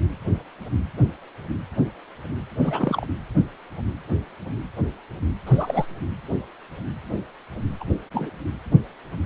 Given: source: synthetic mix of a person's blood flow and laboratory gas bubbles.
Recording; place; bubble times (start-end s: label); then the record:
Doppler ultrasound of blood flow; precordium
2.59-3.07 s: bubbles
5.46-5.86 s: bubbles
7.80-7.84 s: bubbles
8.13-8.31 s: bubbles
From the record:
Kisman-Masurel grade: 221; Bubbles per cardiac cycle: several, 3 to 8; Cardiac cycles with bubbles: 10 to 50%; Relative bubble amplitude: barely perceptible (0.100 to 0.250); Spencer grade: 2 (many but less than half of the cardiac periods contain bubble signals, singularly or in groups); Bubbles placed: anywhere in the cardiac cycle